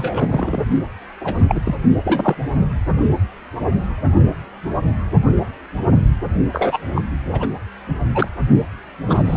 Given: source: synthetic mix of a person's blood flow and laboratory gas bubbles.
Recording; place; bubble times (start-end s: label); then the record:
Doppler ultrasound of blood flow; precordium
0.00-0.62 s: bubbles
1.21-1.34 s: bubbles
1.48-1.60 s: bubbles
1.65-1.75 s: bubbles
2.04-2.35 s: bubbles
6.52-6.78 s: bubbles
6.95-7.02 s: bubbles
7.33-7.48 s: bubbles
7.88-7.96 s: bubbles
8.14-8.28 s: bubbles
9.07-9.37 s: bubbles
From the record:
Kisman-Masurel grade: 233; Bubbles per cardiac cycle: several, 3 to 8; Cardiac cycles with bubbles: 50 to 99%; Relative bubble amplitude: loud (0.450 to 0.775); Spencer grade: 3 (all of the cardiac periods contain showers or single bubble signals, but not dominating or overriding the cardiac motion signals); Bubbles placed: only in the low amplitude regions of the cardiac cycle